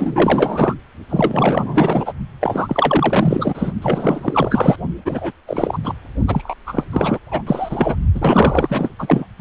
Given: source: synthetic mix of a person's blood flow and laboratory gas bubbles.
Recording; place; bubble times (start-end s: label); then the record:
Doppler ultrasound of blood flow; precordium
0.00-0.74 s: bubbles
1.09-2.13 s: bubbles
2.40-3.71 s: bubbles
3.82-4.76 s: bubbles
5.05-5.32 s: bubbles
5.47-5.79 s: bubbles
5.83-5.94 s: bubbles
6.27-6.54 s: bubbles
6.67-6.85 s: bubbles
6.92-7.19 s: bubbles
7.25-7.43 s: bubbles
7.46-7.97 s: bubbles
8.14-9.26 s: bubbles
9.38-9.41 s: bubbles
From the record:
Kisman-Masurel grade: 444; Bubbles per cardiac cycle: continuous sound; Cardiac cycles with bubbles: 100%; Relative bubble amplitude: maximal (0.775 to 0.999); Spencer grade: 4 (maximum detectable bubble signal sounding continuously throughout systole and diastole of every cardiac period, and overriding the amplitude of the normal cardiac signals); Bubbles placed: only in the low amplitude regions of the cardiac cycle